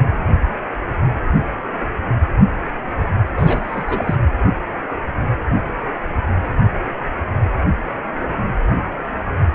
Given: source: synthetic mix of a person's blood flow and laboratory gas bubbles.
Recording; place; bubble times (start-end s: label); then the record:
Doppler ultrasound of blood flow; precordium
3.37-4.16 s: bubbles
From the record:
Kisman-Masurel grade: 222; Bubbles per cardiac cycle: several, 3 to 8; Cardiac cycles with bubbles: 10 to 50%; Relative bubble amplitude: moderate (0.250 to 0.450); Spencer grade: 2 (many but less than half of the cardiac periods contain bubble signals, singularly or in groups); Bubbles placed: anywhere in the cardiac cycle